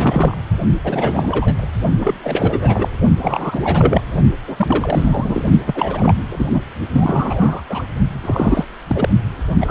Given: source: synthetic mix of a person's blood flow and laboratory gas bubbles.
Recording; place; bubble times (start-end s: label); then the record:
Doppler ultrasound of blood flow; precordium
0.00-0.38 s: bubbles
0.84-1.66 s: bubbles
2.00-2.15 s: bubbles
2.23-2.88 s: bubbles
3.21-3.60 s: bubbles
3.63-4.02 s: bubbles
4.47-5.43 s: bubbles
5.67-6.15 s: bubbles
6.29-6.61 s: bubbles
6.93-7.62 s: bubbles
7.69-7.89 s: bubbles
8.21-8.67 s: bubbles
8.88-9.09 s: bubbles
9.60-9.71 s: bubbles
From the record:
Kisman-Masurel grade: 342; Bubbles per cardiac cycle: rolling drumbeat, 9 or more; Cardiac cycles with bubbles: 100%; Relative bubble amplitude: moderate (0.250 to 0.450); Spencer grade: 3 (all of the cardiac periods contain showers or single bubble signals, but not dominating or overriding the cardiac motion signals); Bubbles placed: only in the low amplitude regions of the cardiac cycle